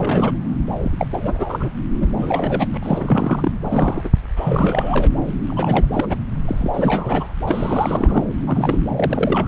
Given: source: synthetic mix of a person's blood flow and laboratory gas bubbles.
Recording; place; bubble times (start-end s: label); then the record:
Doppler ultrasound of blood flow; subclavian vein
0.00-0.33 s: bubbles
0.81-1.07 s: bubbles
1.10-1.46 s: bubbles
1.49-1.70 s: bubbles
2.00-2.08 s: bubbles
2.14-2.67 s: bubbles
2.73-2.77 s: bubbles
2.83-3.52 s: bubbles
3.64-4.09 s: bubbles
4.36-5.09 s: bubbles
5.46-5.85 s: bubbles
5.93-6.17 s: bubbles
6.45-6.71 s: bubbles
6.74-7.32 s: bubbles
7.47-8.23 s: bubbles
8.47-8.80 s: bubbles
8.96-9.47 s: bubbles
From the record:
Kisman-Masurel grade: 342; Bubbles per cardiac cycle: rolling drumbeat, 9 or more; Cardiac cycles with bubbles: 100%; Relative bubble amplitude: moderate (0.250 to 0.450); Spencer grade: 3 (all of the cardiac periods contain showers or single bubble signals, but not dominating or overriding the cardiac motion signals); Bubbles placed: anywhere in the cardiac cycle